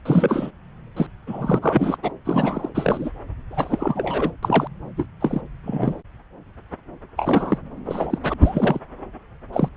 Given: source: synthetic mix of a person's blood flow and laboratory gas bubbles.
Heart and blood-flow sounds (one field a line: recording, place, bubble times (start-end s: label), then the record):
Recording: Doppler ultrasound of blood flow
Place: subclavian vein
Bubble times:
0.05-0.51 s: bubbles
0.96-1.06 s: bubbles
1.27-1.59 s: bubbles
1.61-1.96 s: bubbles
2.02-2.12 s: bubbles
2.25-2.69 s: bubbles
2.75-3.10 s: bubbles
3.50-4.31 s: bubbles
4.43-4.68 s: bubbles
4.97-5.07 s: bubbles
5.21-5.41 s: bubbles
5.64-5.96 s: bubbles
7.18-7.58 s: bubbles
7.86-8.18 s: bubbles
8.23-8.34 s: bubbles
8.40-8.79 s: bubbles
9.53-9.68 s: bubbles
From the record:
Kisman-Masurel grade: 232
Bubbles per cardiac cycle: several, 3 to 8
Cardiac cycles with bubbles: 50 to 99%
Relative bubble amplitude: moderate (0.250 to 0.450)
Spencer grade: 3 (all of the cardiac periods contain showers or single bubble signals, but not dominating or overriding the cardiac motion signals)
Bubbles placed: anywhere in the cardiac cycle